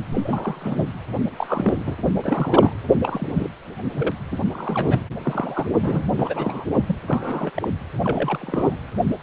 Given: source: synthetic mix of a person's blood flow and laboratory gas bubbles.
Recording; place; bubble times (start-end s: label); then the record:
Doppler ultrasound of blood flow; precordium
0.10-0.86 s: bubbles
1.36-1.95 s: bubbles
2.09-2.72 s: bubbles
3.03-3.47 s: bubbles
3.96-4.12 s: bubbles
4.31-4.39 s: bubbles
4.53-5.02 s: bubbles
5.23-5.67 s: bubbles
5.70-6.04 s: bubbles
6.17-6.66 s: bubbles
6.87-6.96 s: bubbles
7.08-7.50 s: bubbles
7.54-7.68 s: bubbles
8.04-8.76 s: bubbles
From the record:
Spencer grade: 3 (all of the cardiac periods contain showers or single bubble signals, but not dominating or overriding the cardiac motion signals); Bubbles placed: anywhere in the cardiac cycle